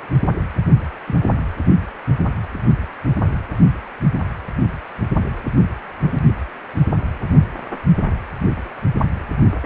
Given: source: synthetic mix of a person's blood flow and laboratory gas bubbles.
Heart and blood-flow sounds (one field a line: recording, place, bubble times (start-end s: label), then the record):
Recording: Doppler ultrasound of blood flow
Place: precordium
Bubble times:
1.06-1.19 s: bubbles
2.19-2.24 s: bubbles
From the record:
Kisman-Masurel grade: 111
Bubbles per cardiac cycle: 1 to 2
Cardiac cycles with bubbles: 1 to 10%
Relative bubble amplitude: barely perceptible (0.100 to 0.250)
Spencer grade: 1 (occasional bubble signal discernible with the cardiac motion signal, with majority of cardiac periods free of bubbles)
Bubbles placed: only in the low amplitude regions of the cardiac cycle